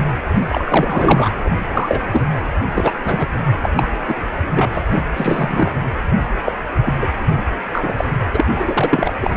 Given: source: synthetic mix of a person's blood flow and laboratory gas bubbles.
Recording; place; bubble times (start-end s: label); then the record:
Doppler ultrasound of blood flow; precordium
0.49-1.30 s: bubbles
1.44-1.50 s: bubbles
1.71-2.00 s: bubbles
2.11-2.21 s: bubbles
2.75-2.95 s: bubbles
3.04-3.28 s: bubbles
3.62-3.70 s: bubbles
3.76-3.90 s: bubbles
4.07-4.16 s: bubbles
4.54-4.69 s: bubbles
4.73-4.83 s: bubbles
4.94-5.04 s: bubbles
5.16-5.70 s: bubbles
6.45-6.58 s: bubbles
6.86-6.93 s: bubbles
7.01-7.07 s: bubbles
7.72-8.04 s: bubbles
8.34-9.12 s: bubbles
9.20-9.37 s: bubbles
From the record:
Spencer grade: 3 (all of the cardiac periods contain showers or single bubble signals, but not dominating or overriding the cardiac motion signals); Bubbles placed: anywhere in the cardiac cycle